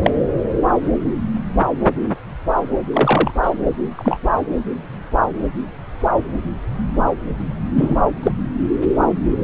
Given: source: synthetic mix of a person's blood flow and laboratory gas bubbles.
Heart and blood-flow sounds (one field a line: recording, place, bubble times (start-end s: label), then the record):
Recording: Doppler ultrasound of blood flow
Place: subclavian vein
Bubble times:
0.02-0.10 s: bubbles
2.93-3.31 s: bubbles
3.43-3.51 s: bubbles
3.97-4.17 s: bubbles
7.75-7.96 s: bubbles
8.23-8.32 s: bubbles
From the record:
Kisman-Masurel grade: 123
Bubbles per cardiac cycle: 1 to 2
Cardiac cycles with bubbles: 10 to 50%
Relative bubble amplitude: loud (0.450 to 0.775)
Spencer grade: 2 (many but less than half of the cardiac periods contain bubble signals, singularly or in groups)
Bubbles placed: anywhere in the cardiac cycle